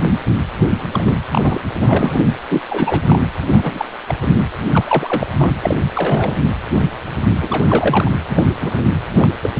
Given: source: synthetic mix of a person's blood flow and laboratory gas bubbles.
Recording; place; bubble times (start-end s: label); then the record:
Doppler ultrasound of blood flow; precordium
0.92-1.18 s: bubbles
1.31-1.61 s: bubbles
1.79-2.21 s: bubbles
2.50-2.61 s: bubbles
2.69-3.04 s: bubbles
3.08-3.19 s: bubbles
3.52-3.85 s: bubbles
4.08-4.37 s: bubbles
4.73-4.85 s: bubbles
4.88-5.27 s: bubbles
5.32-5.52 s: bubbles
5.62-5.78 s: bubbles
5.95-6.34 s: bubbles
7.41-8.12 s: bubbles
8.29-8.44 s: bubbles
8.61-8.82 s: bubbles
9.12-9.29 s: bubbles
9.42-9.50 s: bubbles
From the record:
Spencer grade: 3 (all of the cardiac periods contain showers or single bubble signals, but not dominating or overriding the cardiac motion signals); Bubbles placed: anywhere in the cardiac cycle